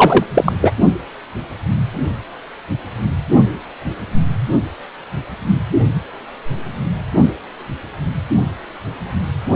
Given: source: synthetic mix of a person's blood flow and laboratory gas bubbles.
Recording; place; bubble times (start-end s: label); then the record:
Doppler ultrasound of blood flow; precordium
0.00-0.24 s: bubbles
0.34-0.53 s: bubbles
0.61-0.72 s: bubbles
From the record:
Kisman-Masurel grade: 213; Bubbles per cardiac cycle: several, 3 to 8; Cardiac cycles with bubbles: 1 to 10%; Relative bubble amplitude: loud (0.450 to 0.775); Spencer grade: 1 (occasional bubble signal discernible with the cardiac motion signal, with majority of cardiac periods free of bubbles); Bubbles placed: only in the low amplitude regions of the cardiac cycle